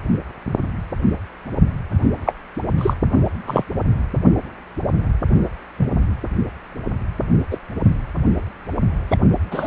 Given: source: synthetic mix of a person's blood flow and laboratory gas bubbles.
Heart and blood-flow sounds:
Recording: Doppler ultrasound of blood flow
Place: precordium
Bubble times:
2.25-2.33 s: bubbles
2.77-2.94 s: bubbles
3.46-3.63 s: bubbles
5.79-5.86 s: bubbles
7.51-7.57 s: bubbles
9.10-9.17 s: bubbles
9.51-9.67 s: bubbles
From the record:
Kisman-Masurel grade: 123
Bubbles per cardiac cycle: 1 to 2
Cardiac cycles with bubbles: 10 to 50%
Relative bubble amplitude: loud (0.450 to 0.775)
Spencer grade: 2 (many but less than half of the cardiac periods contain bubble signals, singularly or in groups)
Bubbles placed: anywhere in the cardiac cycle

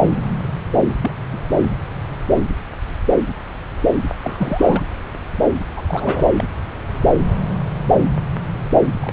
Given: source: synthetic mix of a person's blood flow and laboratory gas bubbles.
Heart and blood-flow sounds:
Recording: Doppler ultrasound of blood flow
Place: subclavian vein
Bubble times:
0.89-0.94 s: bubbles
1.01-1.11 s: bubbles
1.32-1.40 s: bubbles
4.24-4.82 s: bubbles
5.76-5.83 s: bubbles
5.88-6.26 s: bubbles
6.37-6.46 s: bubbles
9.01-9.13 s: bubbles
From the record:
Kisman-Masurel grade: 222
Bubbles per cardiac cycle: several, 3 to 8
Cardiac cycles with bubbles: 10 to 50%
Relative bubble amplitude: moderate (0.250 to 0.450)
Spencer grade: 2 (many but less than half of the cardiac periods contain bubble signals, singularly or in groups)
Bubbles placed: anywhere in the cardiac cycle

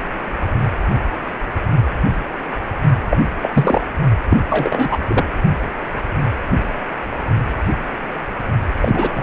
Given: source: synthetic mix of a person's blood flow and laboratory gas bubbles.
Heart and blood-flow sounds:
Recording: Doppler ultrasound of blood flow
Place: precordium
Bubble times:
3.10-3.17 s: bubbles
3.41-3.82 s: bubbles
4.30-4.38 s: bubbles
4.49-4.97 s: bubbles
5.07-5.25 s: bubbles
8.81-9.09 s: bubbles
9.13-9.23 s: bubbles
From the record:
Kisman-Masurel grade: 223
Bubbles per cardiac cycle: several, 3 to 8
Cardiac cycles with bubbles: 10 to 50%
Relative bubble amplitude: loud (0.450 to 0.775)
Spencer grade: 2 (many but less than half of the cardiac periods contain bubble signals, singularly or in groups)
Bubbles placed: only in the low amplitude regions of the cardiac cycle

